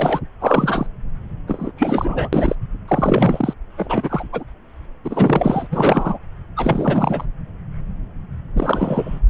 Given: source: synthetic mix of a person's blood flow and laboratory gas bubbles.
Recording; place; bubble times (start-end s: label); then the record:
Doppler ultrasound of blood flow; subclavian vein
0.00-0.20 s: bubbles
0.41-0.86 s: bubbles
1.47-1.72 s: bubbles
1.77-2.29 s: bubbles
2.33-2.55 s: bubbles
2.88-3.54 s: bubbles
3.77-4.24 s: bubbles
4.32-4.43 s: bubbles
5.04-5.67 s: bubbles
5.71-6.19 s: bubbles
6.56-7.25 s: bubbles
8.55-9.20 s: bubbles
From the record:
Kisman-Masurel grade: 333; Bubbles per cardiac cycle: rolling drumbeat, 9 or more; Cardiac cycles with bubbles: 50 to 99%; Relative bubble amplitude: loud (0.450 to 0.775); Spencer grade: 3 (all of the cardiac periods contain showers or single bubble signals, but not dominating or overriding the cardiac motion signals); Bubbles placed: anywhere in the cardiac cycle